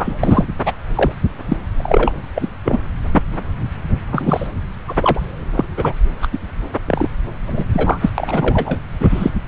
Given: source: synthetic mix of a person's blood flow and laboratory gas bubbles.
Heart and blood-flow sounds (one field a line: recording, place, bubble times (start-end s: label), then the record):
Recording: Doppler ultrasound of blood flow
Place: subclavian vein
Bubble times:
0.00-0.46 s: bubbles
0.66-0.73 s: bubbles
0.95-1.12 s: bubbles
1.46-1.56 s: bubbles
1.77-2.13 s: bubbles
2.35-2.50 s: bubbles
2.65-2.78 s: bubbles
3.11-3.23 s: bubbles
4.12-4.47 s: bubbles
4.88-4.95 s: bubbles
5.02-5.20 s: bubbles
5.53-5.64 s: bubbles
5.77-5.93 s: bubbles
6.22-6.28 s: bubbles
6.32-6.38 s: bubbles
6.87-7.09 s: bubbles
7.46-7.64 s: bubbles
7.73-8.09 s: bubbles
8.18-8.79 s: bubbles
9.00-9.29 s: bubbles
From the record:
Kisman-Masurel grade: 243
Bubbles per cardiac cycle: several, 3 to 8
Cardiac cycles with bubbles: 100%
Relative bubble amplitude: loud (0.450 to 0.775)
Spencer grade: 3 (all of the cardiac periods contain showers or single bubble signals, but not dominating or overriding the cardiac motion signals)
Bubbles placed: anywhere in the cardiac cycle